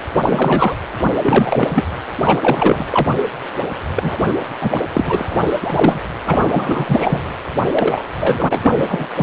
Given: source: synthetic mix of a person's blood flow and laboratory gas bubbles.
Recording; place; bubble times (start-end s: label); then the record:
Doppler ultrasound of blood flow; precordium
0.00-0.02 s: bubbles
0.14-0.78 s: bubbles
1.23-1.84 s: bubbles
2.24-2.86 s: bubbles
2.90-3.10 s: bubbles
3.96-4.17 s: bubbles
4.24-4.35 s: bubbles
4.60-4.81 s: bubbles
4.92-5.58 s: bubbles
5.63-5.99 s: bubbles
6.25-7.21 s: bubbles
7.67-8.05 s: bubbles
8.17-9.07 s: bubbles
9.15-9.23 s: bubbles
From the record:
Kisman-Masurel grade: 343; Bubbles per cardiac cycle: rolling drumbeat, 9 or more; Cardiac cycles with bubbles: 100%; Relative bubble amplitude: loud (0.450 to 0.775); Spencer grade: 3 (all of the cardiac periods contain showers or single bubble signals, but not dominating or overriding the cardiac motion signals); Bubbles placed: anywhere in the cardiac cycle